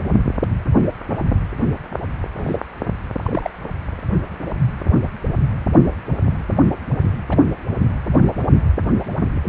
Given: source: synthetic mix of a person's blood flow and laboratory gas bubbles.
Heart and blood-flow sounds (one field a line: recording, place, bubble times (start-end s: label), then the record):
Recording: Doppler ultrasound of blood flow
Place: precordium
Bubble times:
2.35-2.59 s: bubbles
3.23-3.51 s: bubbles
7.29-7.37 s: bubbles
9.42-9.49 s: bubbles
From the record:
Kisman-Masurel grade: 121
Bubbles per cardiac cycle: 1 to 2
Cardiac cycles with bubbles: 10 to 50%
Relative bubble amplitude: barely perceptible (0.100 to 0.250)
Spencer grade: 2 (many but less than half of the cardiac periods contain bubble signals, singularly or in groups)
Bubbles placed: only in the low amplitude regions of the cardiac cycle